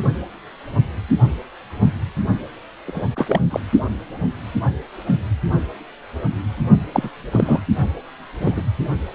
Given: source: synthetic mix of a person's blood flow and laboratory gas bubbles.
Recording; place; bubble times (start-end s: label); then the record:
Doppler ultrasound of blood flow; precordium
2.86-3.04 s: bubbles
3.16-3.41 s: bubbles
3.50-3.60 s: bubbles
6.92-7.10 s: bubbles
7.31-7.60 s: bubbles
8.39-8.62 s: bubbles
From the record:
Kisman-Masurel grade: 233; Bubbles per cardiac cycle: several, 3 to 8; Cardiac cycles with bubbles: 50 to 99%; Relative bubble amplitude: loud (0.450 to 0.775); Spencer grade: 3 (all of the cardiac periods contain showers or single bubble signals, but not dominating or overriding the cardiac motion signals); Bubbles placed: only in the low amplitude regions of the cardiac cycle